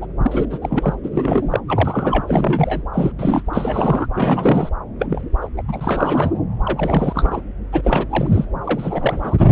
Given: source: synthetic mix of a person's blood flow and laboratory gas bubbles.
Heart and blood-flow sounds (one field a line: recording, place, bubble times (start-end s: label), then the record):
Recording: Doppler ultrasound of blood flow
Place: subclavian vein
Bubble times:
0.00-0.06 s: bubbles
0.22-0.45 s: bubbles
0.50-0.58 s: bubbles
0.61-0.94 s: bubbles
1.03-1.60 s: bubbles
1.68-2.83 s: bubbles
2.94-3.12 s: bubbles
3.18-3.42 s: bubbles
3.53-4.06 s: bubbles
4.14-4.69 s: bubbles
4.99-5.06 s: bubbles
5.10-5.21 s: bubbles
5.41-5.47 s: bubbles
5.57-5.62 s: bubbles
5.67-6.39 s: bubbles
6.64-7.42 s: bubbles
7.72-8.06 s: bubbles
8.11-8.47 s: bubbles
8.64-9.35 s: bubbles
9.38-9.48 s: bubbles
From the record:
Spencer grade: 3 (all of the cardiac periods contain showers or single bubble signals, but not dominating or overriding the cardiac motion signals)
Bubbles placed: anywhere in the cardiac cycle